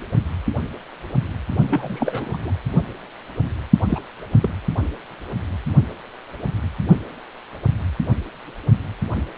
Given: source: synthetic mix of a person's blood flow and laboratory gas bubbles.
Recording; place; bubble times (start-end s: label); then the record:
Doppler ultrasound of blood flow; precordium
1.69-2.37 s: bubbles
2.45-2.52 s: bubbles
3.81-4.00 s: bubbles
4.42-4.50 s: bubbles
From the record:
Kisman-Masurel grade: 222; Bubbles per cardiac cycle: several, 3 to 8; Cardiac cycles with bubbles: 10 to 50%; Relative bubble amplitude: moderate (0.250 to 0.450); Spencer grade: 2 (many but less than half of the cardiac periods contain bubble signals, singularly or in groups); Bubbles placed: only in the low amplitude regions of the cardiac cycle